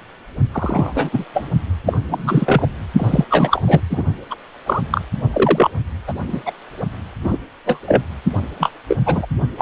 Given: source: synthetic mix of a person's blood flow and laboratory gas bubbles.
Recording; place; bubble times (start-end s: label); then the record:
Doppler ultrasound of blood flow; precordium
0.52-1.09 s: bubbles
1.12-1.24 s: bubbles
1.33-1.49 s: bubbles
1.85-1.98 s: bubbles
2.10-2.69 s: bubbles
2.97-3.24 s: bubbles
3.29-3.63 s: bubbles
3.67-3.81 s: bubbles
3.90-4.03 s: bubbles
4.30-4.34 s: bubbles
4.66-4.82 s: bubbles
4.92-5.01 s: bubbles
5.32-5.70 s: bubbles
6.07-6.13 s: bubbles
6.27-6.42 s: bubbles
6.46-6.51 s: bubbles
7.23-7.38 s: bubbles
7.65-7.80 s: bubbles
7.87-8.03 s: bubbles
8.59-8.71 s: bubbles
8.88-8.97 s: bubbles
9.05-9.26 s: bubbles
9.57-9.62 s: bubbles
From the record:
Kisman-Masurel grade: 243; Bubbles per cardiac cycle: several, 3 to 8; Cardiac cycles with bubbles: 100%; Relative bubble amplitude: loud (0.450 to 0.775); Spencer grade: 3 (all of the cardiac periods contain showers or single bubble signals, but not dominating or overriding the cardiac motion signals); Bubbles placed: only in the low amplitude regions of the cardiac cycle